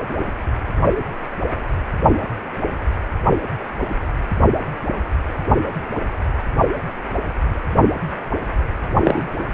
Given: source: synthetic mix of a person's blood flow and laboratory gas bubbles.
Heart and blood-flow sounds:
Doppler ultrasound of blood flow; precordium
9.04-9.22 s: bubbles
From the record:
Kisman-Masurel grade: 113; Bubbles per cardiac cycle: 1 to 2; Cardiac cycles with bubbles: 1 to 10%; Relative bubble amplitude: loud (0.450 to 0.775); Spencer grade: 1 (occasional bubble signal discernible with the cardiac motion signal, with majority of cardiac periods free of bubbles); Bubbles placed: anywhere in the cardiac cycle

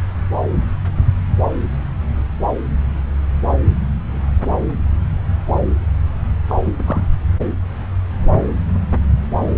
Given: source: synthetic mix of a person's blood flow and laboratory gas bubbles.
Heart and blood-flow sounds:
Doppler ultrasound of blood flow; subclavian vein
6.47-6.55 s: bubbles
6.65-6.70 s: bubbles
6.78-6.82 s: bubbles
6.86-7.07 s: bubbles
From the record:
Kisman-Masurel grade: 212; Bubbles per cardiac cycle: several, 3 to 8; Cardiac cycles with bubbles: 1 to 10%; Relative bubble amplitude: moderate (0.250 to 0.450); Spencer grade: 1 (occasional bubble signal discernible with the cardiac motion signal, with majority of cardiac periods free of bubbles); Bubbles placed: anywhere in the cardiac cycle

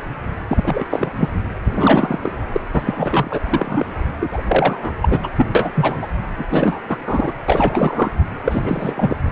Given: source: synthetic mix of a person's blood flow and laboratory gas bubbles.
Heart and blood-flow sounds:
Doppler ultrasound of blood flow; precordium
0.49-0.85 s: bubbles
0.90-1.10 s: bubbles
1.18-1.29 s: bubbles
1.66-2.19 s: bubbles
2.22-2.38 s: bubbles
2.51-2.60 s: bubbles
2.73-3.40 s: bubbles
3.49-3.86 s: bubbles
4.21-4.41 s: bubbles
4.47-4.92 s: bubbles
5.01-5.19 s: bubbles
5.23-5.30 s: bubbles
5.37-5.46 s: bubbles
5.55-5.71 s: bubbles
5.75-6.08 s: bubbles
6.37-6.45 s: bubbles
6.50-6.79 s: bubbles
6.88-6.98 s: bubbles
7.05-7.33 s: bubbles
7.48-8.12 s: bubbles
8.44-9.17 s: bubbles
From the record:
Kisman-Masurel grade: 343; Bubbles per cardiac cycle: rolling drumbeat, 9 or more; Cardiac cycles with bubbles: 100%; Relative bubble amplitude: loud (0.450 to 0.775); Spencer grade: 3 (all of the cardiac periods contain showers or single bubble signals, but not dominating or overriding the cardiac motion signals); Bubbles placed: anywhere in the cardiac cycle

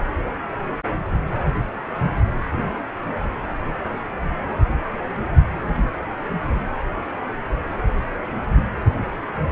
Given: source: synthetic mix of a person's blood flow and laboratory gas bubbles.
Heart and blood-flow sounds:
Doppler ultrasound of blood flow; precordium
3.78-3.92 s: bubbles
5.76-5.89 s: bubbles
From the record:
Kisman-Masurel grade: 121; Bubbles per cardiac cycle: 1 to 2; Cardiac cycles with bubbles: 10 to 50%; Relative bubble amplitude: barely perceptible (0.100 to 0.250); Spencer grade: 2 (many but less than half of the cardiac periods contain bubble signals, singularly or in groups); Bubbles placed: anywhere in the cardiac cycle

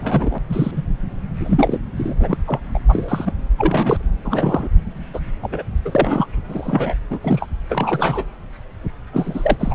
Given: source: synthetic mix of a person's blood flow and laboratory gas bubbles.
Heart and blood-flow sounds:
Doppler ultrasound of blood flow; subclavian vein
0.00-0.39 s: bubbles
0.49-0.82 s: bubbles
1.35-1.79 s: bubbles
1.97-2.13 s: bubbles
2.20-2.38 s: bubbles
2.47-2.60 s: bubbles
2.74-2.79 s: bubbles
2.89-3.33 s: bubbles
3.58-4.08 s: bubbles
4.24-4.69 s: bubbles
5.13-5.21 s: bubbles
5.42-5.62 s: bubbles
5.85-6.28 s: bubbles
6.49-6.94 s: bubbles
7.10-7.19 s: bubbles
7.23-7.48 s: bubbles
7.69-8.25 s: bubbles
9.12-9.56 s: bubbles
9.60-9.75 s: bubbles
From the record:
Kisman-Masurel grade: 233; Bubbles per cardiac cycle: several, 3 to 8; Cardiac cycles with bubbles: 50 to 99%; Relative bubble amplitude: loud (0.450 to 0.775); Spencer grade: 3 (all of the cardiac periods contain showers or single bubble signals, but not dominating or overriding the cardiac motion signals); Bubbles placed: anywhere in the cardiac cycle

